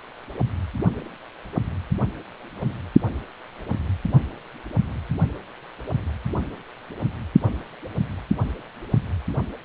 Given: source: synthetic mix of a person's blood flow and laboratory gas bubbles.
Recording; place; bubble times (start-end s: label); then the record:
Doppler ultrasound of blood flow; precordium
no bubbles
From the record:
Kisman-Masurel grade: 000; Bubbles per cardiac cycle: 0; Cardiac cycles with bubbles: 0%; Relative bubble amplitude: no bubbles discernible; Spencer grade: 0 (complete lack of bubble signals)